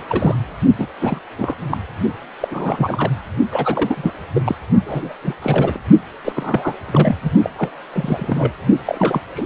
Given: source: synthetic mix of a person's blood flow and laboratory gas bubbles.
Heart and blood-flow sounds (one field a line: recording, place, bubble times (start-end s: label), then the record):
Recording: Doppler ultrasound of blood flow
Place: precordium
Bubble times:
0.09-0.56 s: bubbles
0.78-0.87 s: bubbles
0.99-1.19 s: bubbles
1.38-1.56 s: bubbles
1.71-1.77 s: bubbles
2.40-2.48 s: bubbles
2.50-3.12 s: bubbles
3.50-4.12 s: bubbles
4.35-4.42 s: bubbles
4.44-4.55 s: bubbles
4.86-5.13 s: bubbles
5.22-5.35 s: bubbles
5.42-5.80 s: bubbles
6.25-6.74 s: bubbles
6.87-7.16 s: bubbles
7.23-7.31 s: bubbles
7.43-7.50 s: bubbles
7.58-7.69 s: bubbles
7.93-8.53 s: bubbles
8.85-9.21 s: bubbles
9.34-9.46 s: bubbles
From the record:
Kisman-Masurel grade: 342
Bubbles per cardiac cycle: rolling drumbeat, 9 or more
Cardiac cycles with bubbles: 100%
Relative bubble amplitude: moderate (0.250 to 0.450)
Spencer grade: 3 (all of the cardiac periods contain showers or single bubble signals, but not dominating or overriding the cardiac motion signals)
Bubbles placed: only in the low amplitude regions of the cardiac cycle